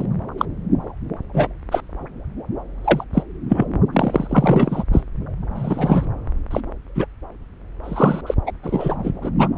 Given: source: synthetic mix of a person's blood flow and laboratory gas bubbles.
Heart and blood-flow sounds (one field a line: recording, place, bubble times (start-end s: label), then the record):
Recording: Doppler ultrasound of blood flow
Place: subclavian vein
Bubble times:
0.00-0.05 s: bubbles
0.38-0.46 s: bubbles
1.33-1.47 s: bubbles
1.71-1.81 s: bubbles
2.84-3.04 s: bubbles
3.14-3.23 s: bubbles
3.49-3.65 s: bubbles
3.93-4.83 s: bubbles
4.92-5.04 s: bubbles
5.55-6.05 s: bubbles
6.50-6.60 s: bubbles
6.95-7.06 s: bubbles
7.83-8.21 s: bubbles
8.26-8.34 s: bubbles
8.46-8.52 s: bubbles
8.62-8.96 s: bubbles
9.04-9.12 s: bubbles
9.22-9.30 s: bubbles
9.38-9.48 s: bubbles
From the record:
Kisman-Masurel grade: 243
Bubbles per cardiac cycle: several, 3 to 8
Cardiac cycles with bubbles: 100%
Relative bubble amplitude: loud (0.450 to 0.775)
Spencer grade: 3 (all of the cardiac periods contain showers or single bubble signals, but not dominating or overriding the cardiac motion signals)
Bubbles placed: anywhere in the cardiac cycle